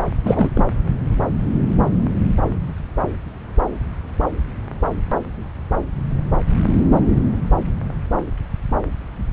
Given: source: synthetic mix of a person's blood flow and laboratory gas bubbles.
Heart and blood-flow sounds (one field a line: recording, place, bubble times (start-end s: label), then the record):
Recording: Doppler ultrasound of blood flow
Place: subclavian vein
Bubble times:
0.25-0.50 s: bubbles
0.55-0.65 s: bubbles
From the record:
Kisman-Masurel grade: 212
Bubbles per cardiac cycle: several, 3 to 8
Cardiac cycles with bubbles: 1 to 10%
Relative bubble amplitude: moderate (0.250 to 0.450)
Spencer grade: 1 (occasional bubble signal discernible with the cardiac motion signal, with majority of cardiac periods free of bubbles)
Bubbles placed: anywhere in the cardiac cycle